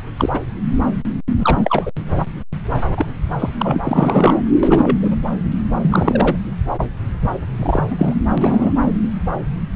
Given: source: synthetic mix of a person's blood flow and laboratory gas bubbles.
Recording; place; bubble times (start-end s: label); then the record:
Doppler ultrasound of blood flow; subclavian vein
0.18-0.39 s: bubbles
1.39-1.92 s: bubbles
2.97-3.06 s: bubbles
3.38-3.50 s: bubbles
3.57-3.78 s: bubbles
3.83-4.41 s: bubbles
4.60-4.98 s: bubbles
5.02-5.16 s: bubbles
5.83-6.36 s: bubbles
7.62-7.83 s: bubbles
7.91-7.96 s: bubbles
7.99-8.13 s: bubbles
8.38-8.71 s: bubbles
From the record:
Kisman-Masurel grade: 222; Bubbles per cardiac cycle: several, 3 to 8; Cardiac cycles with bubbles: 10 to 50%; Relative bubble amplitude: moderate (0.250 to 0.450); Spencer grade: 2 (many but less than half of the cardiac periods contain bubble signals, singularly or in groups); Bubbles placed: anywhere in the cardiac cycle